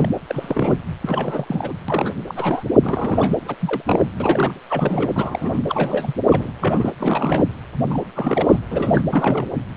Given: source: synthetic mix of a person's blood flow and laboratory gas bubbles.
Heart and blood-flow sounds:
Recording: Doppler ultrasound of blood flow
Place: precordium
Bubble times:
0.00-0.10 s: bubbles
0.28-0.78 s: bubbles
1.01-1.73 s: bubbles
1.88-2.12 s: bubbles
2.27-2.63 s: bubbles
2.83-3.35 s: bubbles
3.46-3.55 s: bubbles
3.59-3.82 s: bubbles
3.87-4.06 s: bubbles
4.20-4.54 s: bubbles
4.69-5.59 s: bubbles
5.68-6.13 s: bubbles
6.30-6.52 s: bubbles
6.60-6.92 s: bubbles
6.98-7.45 s: bubbles
7.90-7.98 s: bubbles
8.15-8.58 s: bubbles
8.70-9.02 s: bubbles
9.12-9.48 s: bubbles
From the record:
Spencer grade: 3 (all of the cardiac periods contain showers or single bubble signals, but not dominating or overriding the cardiac motion signals)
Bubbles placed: anywhere in the cardiac cycle

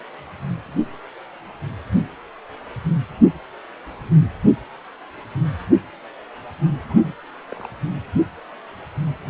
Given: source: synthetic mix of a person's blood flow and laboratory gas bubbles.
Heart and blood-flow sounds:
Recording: Doppler ultrasound of blood flow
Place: precordium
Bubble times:
6.88-7.14 s: bubbles
7.51-7.67 s: bubbles
From the record:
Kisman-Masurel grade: 211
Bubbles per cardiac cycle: several, 3 to 8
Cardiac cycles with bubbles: 1 to 10%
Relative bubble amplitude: barely perceptible (0.100 to 0.250)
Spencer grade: 1 (occasional bubble signal discernible with the cardiac motion signal, with majority of cardiac periods free of bubbles)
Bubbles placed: anywhere in the cardiac cycle

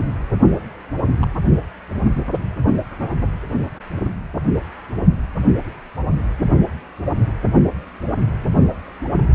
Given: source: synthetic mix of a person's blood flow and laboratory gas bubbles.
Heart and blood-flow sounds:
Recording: Doppler ultrasound of blood flow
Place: precordium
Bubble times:
1.20-1.28 s: bubbles
From the record:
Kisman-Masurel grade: 121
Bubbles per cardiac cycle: 1 to 2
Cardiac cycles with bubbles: 10 to 50%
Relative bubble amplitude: barely perceptible (0.100 to 0.250)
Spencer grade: 2 (many but less than half of the cardiac periods contain bubble signals, singularly or in groups)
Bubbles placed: only in the low amplitude regions of the cardiac cycle

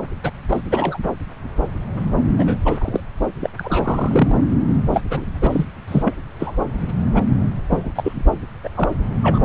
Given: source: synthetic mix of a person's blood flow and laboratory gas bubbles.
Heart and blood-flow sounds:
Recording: Doppler ultrasound of blood flow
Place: subclavian vein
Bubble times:
0.24-0.31 s: bubbles
0.49-0.61 s: bubbles
0.70-0.98 s: bubbles
2.38-2.58 s: bubbles
2.65-3.00 s: bubbles
3.40-3.50 s: bubbles
3.58-4.37 s: bubbles
4.68-4.74 s: bubbles
4.83-5.01 s: bubbles
5.10-5.25 s: bubbles
5.34-5.65 s: bubbles
5.88-6.14 s: bubbles
6.39-6.52 s: bubbles
7.14-7.22 s: bubbles
7.70-7.93 s: bubbles
7.95-8.23 s: bubbles
8.63-8.69 s: bubbles
8.74-8.92 s: bubbles
9.21-9.45 s: bubbles
From the record:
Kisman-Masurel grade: 242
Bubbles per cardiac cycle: several, 3 to 8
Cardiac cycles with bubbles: 100%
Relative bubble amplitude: moderate (0.250 to 0.450)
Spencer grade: 3 (all of the cardiac periods contain showers or single bubble signals, but not dominating or overriding the cardiac motion signals)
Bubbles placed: anywhere in the cardiac cycle

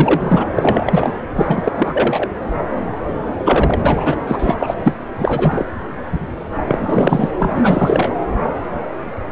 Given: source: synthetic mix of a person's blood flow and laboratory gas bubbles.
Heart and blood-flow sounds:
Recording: Doppler ultrasound of blood flow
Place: subclavian vein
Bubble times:
0.00-0.45 s: bubbles
0.56-1.15 s: bubbles
1.36-1.72 s: bubbles
1.75-2.29 s: bubbles
3.44-4.16 s: bubbles
4.27-4.56 s: bubbles
4.59-4.74 s: bubbles
4.84-4.96 s: bubbles
5.20-5.65 s: bubbles
6.68-7.30 s: bubbles
7.39-8.11 s: bubbles
From the record:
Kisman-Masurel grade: 333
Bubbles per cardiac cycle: rolling drumbeat, 9 or more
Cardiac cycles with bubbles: 50 to 99%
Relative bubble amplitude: loud (0.450 to 0.775)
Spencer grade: 3 (all of the cardiac periods contain showers or single bubble signals, but not dominating or overriding the cardiac motion signals)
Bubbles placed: anywhere in the cardiac cycle

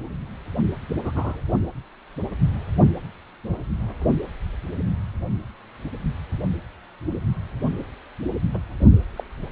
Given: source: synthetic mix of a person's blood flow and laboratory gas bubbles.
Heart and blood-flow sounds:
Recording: Doppler ultrasound of blood flow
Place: precordium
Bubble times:
1.03-1.11 s: bubbles
1.15-1.41 s: bubbles
8.49-8.59 s: bubbles
9.16-9.23 s: bubbles
From the record:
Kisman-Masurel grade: 121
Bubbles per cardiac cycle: 1 to 2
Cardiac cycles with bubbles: 10 to 50%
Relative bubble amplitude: barely perceptible (0.100 to 0.250)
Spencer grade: 2 (many but less than half of the cardiac periods contain bubble signals, singularly or in groups)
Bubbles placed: only in the low amplitude regions of the cardiac cycle

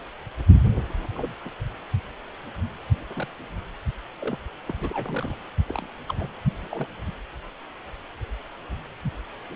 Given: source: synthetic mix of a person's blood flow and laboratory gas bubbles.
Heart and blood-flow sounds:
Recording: Doppler ultrasound of blood flow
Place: precordium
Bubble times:
1.14-1.34 s: bubbles
1.45-1.49 s: bubbles
3.17-3.28 s: bubbles
4.20-4.36 s: bubbles
4.67-4.73 s: bubbles
4.76-5.34 s: bubbles
5.68-5.86 s: bubbles
6.08-6.14 s: bubbles
6.18-6.27 s: bubbles
6.62-6.68 s: bubbles
6.72-6.86 s: bubbles
From the record:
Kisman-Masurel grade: 221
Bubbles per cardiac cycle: several, 3 to 8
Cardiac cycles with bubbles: 10 to 50%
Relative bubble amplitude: barely perceptible (0.100 to 0.250)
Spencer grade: 2 (many but less than half of the cardiac periods contain bubble signals, singularly or in groups)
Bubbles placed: only in the low amplitude regions of the cardiac cycle

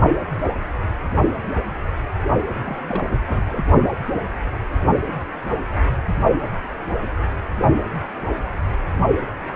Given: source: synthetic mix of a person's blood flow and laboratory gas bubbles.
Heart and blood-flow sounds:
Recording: Doppler ultrasound of blood flow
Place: precordium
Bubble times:
2.47-2.83 s: bubbles
2.87-3.02 s: bubbles
3.27-3.63 s: bubbles
From the record:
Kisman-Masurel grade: 211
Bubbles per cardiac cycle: several, 3 to 8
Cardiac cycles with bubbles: 1 to 10%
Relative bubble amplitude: barely perceptible (0.100 to 0.250)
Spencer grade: 1 (occasional bubble signal discernible with the cardiac motion signal, with majority of cardiac periods free of bubbles)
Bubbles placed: only in the low amplitude regions of the cardiac cycle

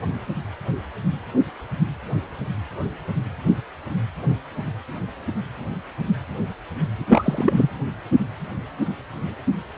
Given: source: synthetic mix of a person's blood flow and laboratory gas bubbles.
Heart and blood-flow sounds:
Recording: Doppler ultrasound of blood flow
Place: precordium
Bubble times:
7.08-7.68 s: bubbles
From the record:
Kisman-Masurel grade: 213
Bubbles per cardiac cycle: several, 3 to 8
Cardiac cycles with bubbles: 1 to 10%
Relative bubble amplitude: loud (0.450 to 0.775)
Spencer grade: 1 (occasional bubble signal discernible with the cardiac motion signal, with majority of cardiac periods free of bubbles)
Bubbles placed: anywhere in the cardiac cycle

